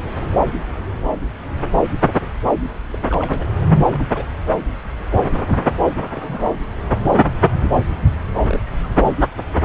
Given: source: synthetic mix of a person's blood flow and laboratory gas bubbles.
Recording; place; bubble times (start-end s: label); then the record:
Doppler ultrasound of blood flow; subclavian vein
2.90-2.98 s: bubbles
3.09-3.50 s: bubbles
3.92-4.09 s: bubbles
4.14-4.25 s: bubbles
6.13-6.42 s: bubbles
8.47-8.60 s: bubbles
8.83-8.88 s: bubbles
From the record:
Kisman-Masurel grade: 121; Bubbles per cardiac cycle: 1 to 2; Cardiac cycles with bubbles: 10 to 50%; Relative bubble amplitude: barely perceptible (0.100 to 0.250); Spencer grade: 2 (many but less than half of the cardiac periods contain bubble signals, singularly or in groups); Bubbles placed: anywhere in the cardiac cycle